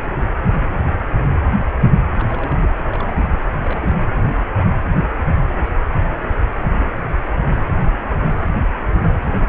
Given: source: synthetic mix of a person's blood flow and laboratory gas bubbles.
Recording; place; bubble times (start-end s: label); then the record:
Doppler ultrasound of blood flow; precordium
2.18-2.72 s: bubbles
2.83-3.41 s: bubbles
3.60-3.95 s: bubbles
9.24-9.49 s: bubbles
From the record:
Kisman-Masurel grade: 221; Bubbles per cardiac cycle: several, 3 to 8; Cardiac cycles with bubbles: 10 to 50%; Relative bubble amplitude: barely perceptible (0.100 to 0.250); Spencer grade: 2 (many but less than half of the cardiac periods contain bubble signals, singularly or in groups); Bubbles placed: anywhere in the cardiac cycle